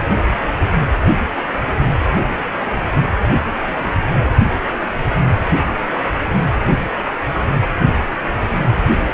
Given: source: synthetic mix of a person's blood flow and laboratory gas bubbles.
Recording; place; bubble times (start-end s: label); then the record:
Doppler ultrasound of blood flow; precordium
3.78-3.95 s: bubbles
4.82-4.90 s: bubbles
From the record:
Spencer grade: 2 (many but less than half of the cardiac periods contain bubble signals, singularly or in groups); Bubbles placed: only in the low amplitude regions of the cardiac cycle